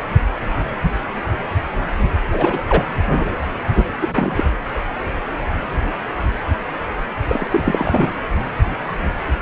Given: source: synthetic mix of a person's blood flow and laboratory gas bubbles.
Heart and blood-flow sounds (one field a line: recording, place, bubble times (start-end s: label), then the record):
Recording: Doppler ultrasound of blood flow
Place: precordium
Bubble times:
2.31-2.59 s: bubbles
2.69-2.84 s: bubbles
4.00-4.43 s: bubbles
7.28-7.47 s: bubbles
7.52-8.10 s: bubbles
From the record:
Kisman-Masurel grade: 223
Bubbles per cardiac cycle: several, 3 to 8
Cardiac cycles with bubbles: 10 to 50%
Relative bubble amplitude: loud (0.450 to 0.775)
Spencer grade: 2 (many but less than half of the cardiac periods contain bubble signals, singularly or in groups)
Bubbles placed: anywhere in the cardiac cycle